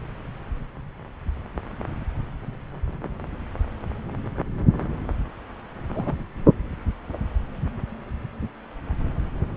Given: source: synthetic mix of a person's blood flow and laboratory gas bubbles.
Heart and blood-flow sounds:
Doppler ultrasound of blood flow; subclavian vein
5.92-6.14 s: bubbles
From the record:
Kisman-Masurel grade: 111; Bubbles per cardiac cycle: 1 to 2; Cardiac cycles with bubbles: 1 to 10%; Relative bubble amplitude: barely perceptible (0.100 to 0.250); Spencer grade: 1 (occasional bubble signal discernible with the cardiac motion signal, with majority of cardiac periods free of bubbles); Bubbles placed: anywhere in the cardiac cycle

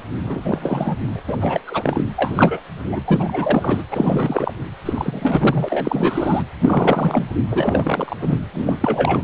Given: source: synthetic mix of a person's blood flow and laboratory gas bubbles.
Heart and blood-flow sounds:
Doppler ultrasound of blood flow; precordium
0.23-0.42 s: bubbles
0.45-0.96 s: bubbles
1.04-1.23 s: bubbles
1.27-1.38 s: bubbles
1.40-1.60 s: bubbles
1.67-2.04 s: bubbles
2.16-2.62 s: bubbles
2.85-3.00 s: bubbles
3.06-3.83 s: bubbles
3.91-4.53 s: bubbles
4.85-6.43 s: bubbles
6.60-7.24 s: bubbles
7.51-8.15 s: bubbles
8.20-8.40 s: bubbles
8.54-8.76 s: bubbles
8.80-9.23 s: bubbles
From the record:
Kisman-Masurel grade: 343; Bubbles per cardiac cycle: rolling drumbeat, 9 or more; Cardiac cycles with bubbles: 100%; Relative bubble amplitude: loud (0.450 to 0.775); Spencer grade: 3 (all of the cardiac periods contain showers or single bubble signals, but not dominating or overriding the cardiac motion signals); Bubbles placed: anywhere in the cardiac cycle

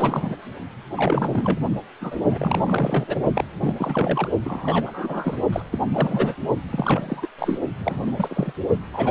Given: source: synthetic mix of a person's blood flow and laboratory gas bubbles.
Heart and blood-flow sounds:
Doppler ultrasound of blood flow; precordium
0.00-0.35 s: bubbles
0.97-1.60 s: bubbles
2.00-2.17 s: bubbles
2.31-3.19 s: bubbles
3.34-3.44 s: bubbles
3.60-4.29 s: bubbles
4.44-5.37 s: bubbles
5.52-5.62 s: bubbles
5.71-5.79 s: bubbles
5.93-6.35 s: bubbles
6.72-7.27 s: bubbles
7.38-7.58 s: bubbles
7.79-8.11 s: bubbles
8.16-8.53 s: bubbles
8.93-9.11 s: bubbles
From the record:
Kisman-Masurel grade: 342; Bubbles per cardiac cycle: rolling drumbeat, 9 or more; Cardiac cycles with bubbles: 100%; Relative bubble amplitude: moderate (0.250 to 0.450); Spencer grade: 3 (all of the cardiac periods contain showers or single bubble signals, but not dominating or overriding the cardiac motion signals); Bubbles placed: only in the low amplitude regions of the cardiac cycle

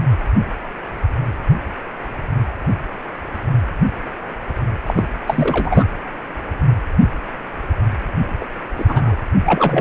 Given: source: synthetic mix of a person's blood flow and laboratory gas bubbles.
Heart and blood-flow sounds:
Doppler ultrasound of blood flow; precordium
4.87-5.08 s: bubbles
5.27-5.84 s: bubbles
8.40-8.45 s: bubbles
8.79-8.85 s: bubbles
8.88-9.16 s: bubbles
9.45-9.81 s: bubbles
From the record:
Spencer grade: 2 (many but less than half of the cardiac periods contain bubble signals, singularly or in groups); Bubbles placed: anywhere in the cardiac cycle

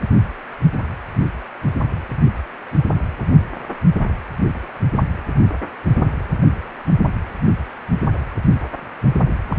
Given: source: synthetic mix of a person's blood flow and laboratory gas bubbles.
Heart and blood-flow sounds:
Doppler ultrasound of blood flow; precordium
9.50-9.56 s: bubbles
From the record:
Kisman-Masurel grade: 212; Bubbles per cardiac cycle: several, 3 to 8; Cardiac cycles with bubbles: 1 to 10%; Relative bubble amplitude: moderate (0.250 to 0.450); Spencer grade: 1 (occasional bubble signal discernible with the cardiac motion signal, with majority of cardiac periods free of bubbles); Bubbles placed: anywhere in the cardiac cycle

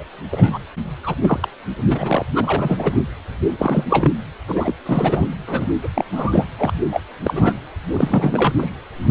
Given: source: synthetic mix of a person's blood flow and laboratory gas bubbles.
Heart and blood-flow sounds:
Doppler ultrasound of blood flow; precordium
0.00-0.03 s: bubbles
0.31-0.58 s: bubbles
1.03-1.15 s: bubbles
1.22-1.48 s: bubbles
1.86-2.25 s: bubbles
2.35-3.03 s: bubbles
3.58-3.85 s: bubbles
3.90-4.17 s: bubbles
4.48-4.74 s: bubbles
4.86-5.26 s: bubbles
5.47-5.67 s: bubbles
5.83-5.88 s: bubbles
5.94-6.04 s: bubbles
6.11-6.48 s: bubbles
6.57-6.72 s: bubbles
6.92-7.00 s: bubbles
7.23-7.54 s: bubbles
7.92-8.71 s: bubbles
9.09-9.11 s: bubbles
From the record:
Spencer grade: 3 (all of the cardiac periods contain showers or single bubble signals, but not dominating or overriding the cardiac motion signals); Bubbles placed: anywhere in the cardiac cycle

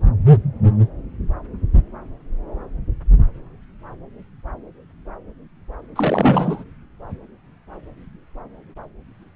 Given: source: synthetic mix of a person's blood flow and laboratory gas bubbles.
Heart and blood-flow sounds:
Doppler ultrasound of blood flow; subclavian vein
5.95-6.64 s: bubbles
From the record:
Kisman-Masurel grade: 212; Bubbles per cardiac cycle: several, 3 to 8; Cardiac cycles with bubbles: 1 to 10%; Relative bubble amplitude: moderate (0.250 to 0.450); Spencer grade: 1 (occasional bubble signal discernible with the cardiac motion signal, with majority of cardiac periods free of bubbles); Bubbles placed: anywhere in the cardiac cycle

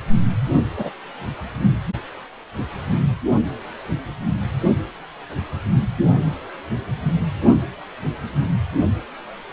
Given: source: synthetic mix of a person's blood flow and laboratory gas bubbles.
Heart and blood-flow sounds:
Doppler ultrasound of blood flow; precordium
0.77-0.90 s: bubbles
From the record:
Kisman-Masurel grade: 112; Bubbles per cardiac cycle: 1 to 2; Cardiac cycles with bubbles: 1 to 10%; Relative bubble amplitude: moderate (0.250 to 0.450); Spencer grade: 1 (occasional bubble signal discernible with the cardiac motion signal, with majority of cardiac periods free of bubbles); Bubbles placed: anywhere in the cardiac cycle

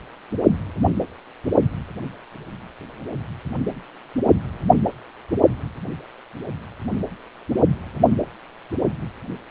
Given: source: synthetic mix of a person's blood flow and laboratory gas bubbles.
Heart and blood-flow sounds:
Doppler ultrasound of blood flow; precordium
no bubbles
From the record:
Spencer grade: 0 (complete lack of bubble signals)

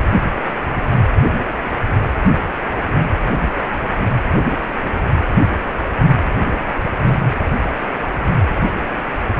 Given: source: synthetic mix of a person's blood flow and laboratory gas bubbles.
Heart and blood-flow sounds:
Doppler ultrasound of blood flow; precordium
no bubbles
From the record:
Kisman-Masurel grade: 000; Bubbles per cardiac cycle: 0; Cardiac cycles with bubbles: 0%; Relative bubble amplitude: no bubbles discernible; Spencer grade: 0 (complete lack of bubble signals)

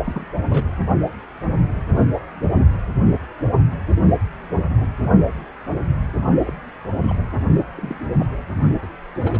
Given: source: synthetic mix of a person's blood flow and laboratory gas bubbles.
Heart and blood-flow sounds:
Doppler ultrasound of blood flow; precordium
0.04-0.25 s: bubbles
0.48-0.71 s: bubbles
6.43-6.53 s: bubbles
7.08-7.14 s: bubbles
7.76-8.00 s: bubbles
8.20-8.26 s: bubbles
8.82-8.88 s: bubbles
9.21-9.40 s: bubbles
From the record:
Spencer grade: 2 (many but less than half of the cardiac periods contain bubble signals, singularly or in groups); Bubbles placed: only in the low amplitude regions of the cardiac cycle

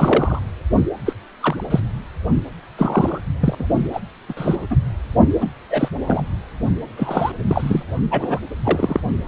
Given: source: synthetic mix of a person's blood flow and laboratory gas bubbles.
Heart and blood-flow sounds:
Doppler ultrasound of blood flow; precordium
0.00-0.39 s: bubbles
1.05-1.14 s: bubbles
1.41-1.63 s: bubbles
1.70-1.80 s: bubbles
2.77-3.21 s: bubbles
3.41-3.67 s: bubbles
3.93-4.00 s: bubbles
4.29-4.33 s: bubbles
4.37-4.56 s: bubbles
4.70-4.75 s: bubbles
5.40-5.46 s: bubbles
5.71-5.88 s: bubbles
6.06-6.23 s: bubbles
6.96-7.32 s: bubbles
7.48-7.83 s: bubbles
8.11-8.40 s: bubbles
8.63-9.00 s: bubbles
From the record:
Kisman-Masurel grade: 243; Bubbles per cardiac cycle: several, 3 to 8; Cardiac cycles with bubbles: 100%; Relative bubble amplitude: loud (0.450 to 0.775); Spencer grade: 3 (all of the cardiac periods contain showers or single bubble signals, but not dominating or overriding the cardiac motion signals); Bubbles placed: only in the low amplitude regions of the cardiac cycle

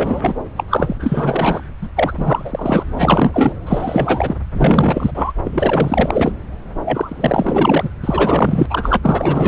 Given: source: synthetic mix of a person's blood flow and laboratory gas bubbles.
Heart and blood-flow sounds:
Doppler ultrasound of blood flow; subclavian vein
0.00-0.35 s: bubbles
0.56-0.64 s: bubbles
0.68-1.61 s: bubbles
1.82-1.89 s: bubbles
1.96-2.84 s: bubbles
2.92-3.57 s: bubbles
3.65-4.34 s: bubbles
4.53-5.33 s: bubbles
5.43-6.34 s: bubbles
6.84-7.89 s: bubbles
8.04-8.67 s: bubbles
8.70-8.97 s: bubbles
9.02-9.48 s: bubbles
From the record:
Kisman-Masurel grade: 444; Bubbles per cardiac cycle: continuous sound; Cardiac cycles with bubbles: 100%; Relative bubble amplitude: maximal (0.775 to 0.999); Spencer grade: 4 (maximum detectable bubble signal sounding continuously throughout systole and diastole of every cardiac period, and overriding the amplitude of the normal cardiac signals); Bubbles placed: anywhere in the cardiac cycle

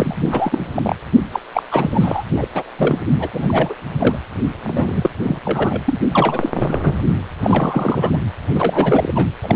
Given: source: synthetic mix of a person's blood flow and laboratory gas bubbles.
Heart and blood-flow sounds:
Doppler ultrasound of blood flow; precordium
0.00-0.95 s: bubbles
1.32-1.40 s: bubbles
1.53-1.62 s: bubbles
1.70-2.23 s: bubbles
2.34-2.48 s: bubbles
2.54-2.63 s: bubbles
2.77-3.00 s: bubbles
3.19-3.29 s: bubbles
3.33-3.75 s: bubbles
3.98-4.18 s: bubbles
4.64-5.10 s: bubbles
5.24-5.40 s: bubbles
5.45-5.81 s: bubbles
5.86-5.97 s: bubbles
6.12-6.50 s: bubbles
6.60-6.80 s: bubbles
6.83-6.93 s: bubbles
7.43-8.19 s: bubbles
8.54-9.27 s: bubbles
9.43-9.56 s: bubbles
From the record:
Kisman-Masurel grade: 343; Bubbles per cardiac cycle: rolling drumbeat, 9 or more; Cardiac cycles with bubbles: 100%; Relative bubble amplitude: loud (0.450 to 0.775); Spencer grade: 3 (all of the cardiac periods contain showers or single bubble signals, but not dominating or overriding the cardiac motion signals); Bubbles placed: anywhere in the cardiac cycle

